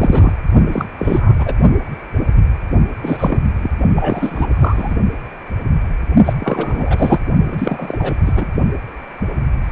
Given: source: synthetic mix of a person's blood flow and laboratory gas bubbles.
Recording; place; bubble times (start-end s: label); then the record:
Doppler ultrasound of blood flow; precordium
0.00-0.33 s: bubbles
0.71-0.85 s: bubbles
0.98-1.33 s: bubbles
1.38-1.54 s: bubbles
3.02-3.40 s: bubbles
3.62-3.71 s: bubbles
3.95-4.46 s: bubbles
4.51-4.95 s: bubbles
6.25-6.33 s: bubbles
6.40-7.19 s: bubbles
7.48-8.16 s: bubbles
8.25-8.48 s: bubbles
From the record:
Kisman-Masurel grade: 333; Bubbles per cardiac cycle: rolling drumbeat, 9 or more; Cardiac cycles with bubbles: 50 to 99%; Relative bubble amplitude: loud (0.450 to 0.775); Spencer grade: 3 (all of the cardiac periods contain showers or single bubble signals, but not dominating or overriding the cardiac motion signals); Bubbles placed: only in the low amplitude regions of the cardiac cycle